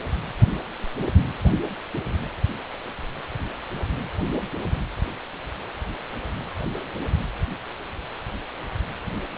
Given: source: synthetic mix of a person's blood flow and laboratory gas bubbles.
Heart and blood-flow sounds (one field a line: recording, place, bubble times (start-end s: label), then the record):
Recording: Doppler ultrasound of blood flow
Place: precordium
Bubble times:
no bubbles
From the record:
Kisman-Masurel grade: 000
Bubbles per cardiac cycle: 0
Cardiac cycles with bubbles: 0%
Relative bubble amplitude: no bubbles discernible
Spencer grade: 0 (complete lack of bubble signals)